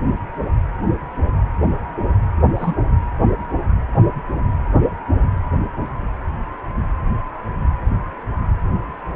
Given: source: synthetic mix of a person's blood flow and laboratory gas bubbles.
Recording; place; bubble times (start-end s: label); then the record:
Doppler ultrasound of blood flow; precordium
2.54-2.76 s: bubbles
From the record:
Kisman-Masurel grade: 112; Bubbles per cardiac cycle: 1 to 2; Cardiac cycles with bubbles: 1 to 10%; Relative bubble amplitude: moderate (0.250 to 0.450); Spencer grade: 1 (occasional bubble signal discernible with the cardiac motion signal, with majority of cardiac periods free of bubbles); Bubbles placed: anywhere in the cardiac cycle